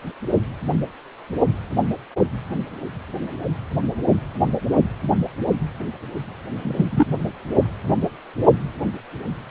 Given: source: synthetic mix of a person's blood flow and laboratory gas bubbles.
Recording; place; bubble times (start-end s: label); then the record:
Doppler ultrasound of blood flow; precordium
6.58-6.85 s: bubbles
6.91-7.06 s: bubbles
From the record:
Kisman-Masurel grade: 113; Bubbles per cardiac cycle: 1 to 2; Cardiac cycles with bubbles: 1 to 10%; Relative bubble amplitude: loud (0.450 to 0.775); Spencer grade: 1 (occasional bubble signal discernible with the cardiac motion signal, with majority of cardiac periods free of bubbles); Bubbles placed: only in the low amplitude regions of the cardiac cycle